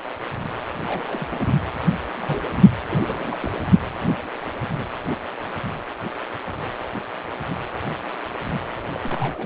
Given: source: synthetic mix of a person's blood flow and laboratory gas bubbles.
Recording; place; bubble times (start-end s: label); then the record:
Doppler ultrasound of blood flow; precordium
0.87-1.47 s: bubbles
2.17-2.48 s: bubbles
2.89-3.37 s: bubbles
3.40-3.52 s: bubbles
8.94-9.00 s: bubbles
9.03-9.46 s: bubbles
From the record:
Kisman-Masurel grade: 221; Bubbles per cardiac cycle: several, 3 to 8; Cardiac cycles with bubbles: 10 to 50%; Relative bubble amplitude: barely perceptible (0.100 to 0.250); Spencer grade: 2 (many but less than half of the cardiac periods contain bubble signals, singularly or in groups); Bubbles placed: anywhere in the cardiac cycle